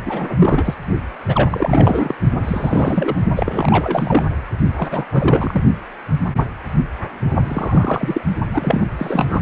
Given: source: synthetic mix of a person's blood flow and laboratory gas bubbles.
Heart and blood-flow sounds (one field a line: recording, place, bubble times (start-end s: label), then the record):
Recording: Doppler ultrasound of blood flow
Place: precordium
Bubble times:
0.06-0.74 s: bubbles
1.27-2.15 s: bubbles
2.43-3.15 s: bubbles
3.35-4.25 s: bubbles
4.77-5.05 s: bubbles
5.12-5.61 s: bubbles
7.44-8.21 s: bubbles
8.53-8.86 s: bubbles
8.98-9.39 s: bubbles
From the record:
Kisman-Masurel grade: 332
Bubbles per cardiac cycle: rolling drumbeat, 9 or more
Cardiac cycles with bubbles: 50 to 99%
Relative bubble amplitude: moderate (0.250 to 0.450)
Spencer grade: 3 (all of the cardiac periods contain showers or single bubble signals, but not dominating or overriding the cardiac motion signals)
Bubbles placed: only in the low amplitude regions of the cardiac cycle